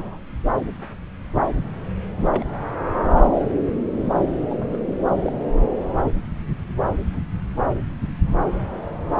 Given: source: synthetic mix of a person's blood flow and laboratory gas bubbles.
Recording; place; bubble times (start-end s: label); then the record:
Doppler ultrasound of blood flow; subclavian vein
0.00-0.18 s: bubbles
2.25-2.44 s: bubbles
4.48-4.77 s: bubbles
5.22-5.32 s: bubbles
From the record:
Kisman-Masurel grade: 121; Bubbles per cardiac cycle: 1 to 2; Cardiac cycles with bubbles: 10 to 50%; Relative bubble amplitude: barely perceptible (0.100 to 0.250); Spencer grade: 2 (many but less than half of the cardiac periods contain bubble signals, singularly or in groups); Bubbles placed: anywhere in the cardiac cycle